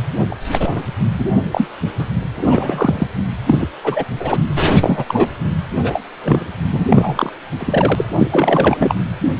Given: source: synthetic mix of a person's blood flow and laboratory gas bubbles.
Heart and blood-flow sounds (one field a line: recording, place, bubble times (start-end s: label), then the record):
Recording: Doppler ultrasound of blood flow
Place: precordium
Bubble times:
0.32-0.36 s: bubbles
0.49-0.85 s: bubbles
1.19-1.28 s: bubbles
1.52-1.69 s: bubbles
1.99-2.05 s: bubbles
2.34-3.07 s: bubbles
3.47-3.66 s: bubbles
3.83-4.04 s: bubbles
4.19-4.40 s: bubbles
4.81-5.04 s: bubbles
5.08-5.29 s: bubbles
5.83-6.03 s: bubbles
6.24-6.50 s: bubbles
6.72-6.87 s: bubbles
6.90-7.33 s: bubbles
7.58-8.05 s: bubbles
8.19-8.95 s: bubbles
From the record:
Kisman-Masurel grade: 243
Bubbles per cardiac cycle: several, 3 to 8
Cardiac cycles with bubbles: 100%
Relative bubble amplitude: loud (0.450 to 0.775)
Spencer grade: 3 (all of the cardiac periods contain showers or single bubble signals, but not dominating or overriding the cardiac motion signals)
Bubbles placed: anywhere in the cardiac cycle